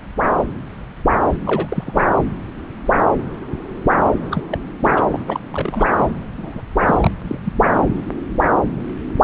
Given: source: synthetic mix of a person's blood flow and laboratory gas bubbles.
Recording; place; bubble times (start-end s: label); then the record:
Doppler ultrasound of blood flow; subclavian vein
1.46-2.05 s: bubbles
2.16-2.23 s: bubbles
4.31-4.43 s: bubbles
4.50-4.58 s: bubbles
4.82-4.94 s: bubbles
4.97-5.03 s: bubbles
5.12-5.20 s: bubbles
5.26-5.40 s: bubbles
5.50-5.89 s: bubbles
5.97-6.07 s: bubbles
6.38-6.62 s: bubbles
6.87-7.11 s: bubbles
7.23-7.38 s: bubbles
7.44-7.54 s: bubbles
7.60-7.71 s: bubbles
7.74-7.89 s: bubbles
From the record:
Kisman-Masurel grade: 232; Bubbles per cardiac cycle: several, 3 to 8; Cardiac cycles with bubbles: 50 to 99%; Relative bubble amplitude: moderate (0.250 to 0.450); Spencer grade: 3 (all of the cardiac periods contain showers or single bubble signals, but not dominating or overriding the cardiac motion signals); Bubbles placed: anywhere in the cardiac cycle